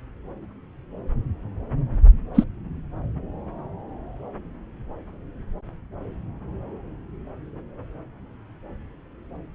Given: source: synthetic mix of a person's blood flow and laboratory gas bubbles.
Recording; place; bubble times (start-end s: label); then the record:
Doppler ultrasound of blood flow; subclavian vein
2.34-2.44 s: bubbles
From the record:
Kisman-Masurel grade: 113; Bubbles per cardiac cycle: 1 to 2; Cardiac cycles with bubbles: 1 to 10%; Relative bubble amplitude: loud (0.450 to 0.775); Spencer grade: 1 (occasional bubble signal discernible with the cardiac motion signal, with majority of cardiac periods free of bubbles); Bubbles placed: anywhere in the cardiac cycle